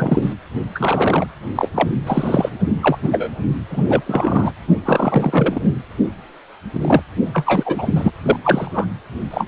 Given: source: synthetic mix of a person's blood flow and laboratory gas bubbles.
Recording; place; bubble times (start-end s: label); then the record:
Doppler ultrasound of blood flow; precordium
0.00-0.34 s: bubbles
0.75-1.27 s: bubbles
1.55-1.69 s: bubbles
1.75-1.91 s: bubbles
2.06-2.49 s: bubbles
2.81-2.98 s: bubbles
3.03-3.09 s: bubbles
3.12-3.29 s: bubbles
3.71-3.83 s: bubbles
3.86-4.02 s: bubbles
4.05-4.53 s: bubbles
4.85-5.61 s: bubbles
6.73-7.03 s: bubbles
7.33-8.10 s: bubbles
8.23-8.36 s: bubbles
8.41-8.87 s: bubbles
9.30-9.46 s: bubbles
From the record:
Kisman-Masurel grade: 233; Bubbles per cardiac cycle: several, 3 to 8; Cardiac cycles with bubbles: 50 to 99%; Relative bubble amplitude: loud (0.450 to 0.775); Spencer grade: 3 (all of the cardiac periods contain showers or single bubble signals, but not dominating or overriding the cardiac motion signals); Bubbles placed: anywhere in the cardiac cycle